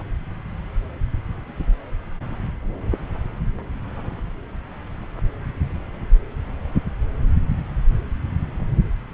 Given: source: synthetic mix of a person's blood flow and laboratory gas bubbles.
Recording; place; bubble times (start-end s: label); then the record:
Doppler ultrasound of blood flow; subclavian vein
0.00-0.03 s: bubbles
From the record:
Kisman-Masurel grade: 212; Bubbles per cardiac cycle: several, 3 to 8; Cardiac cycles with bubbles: 1 to 10%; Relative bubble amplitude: moderate (0.250 to 0.450); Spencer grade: 1 (occasional bubble signal discernible with the cardiac motion signal, with majority of cardiac periods free of bubbles); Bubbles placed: anywhere in the cardiac cycle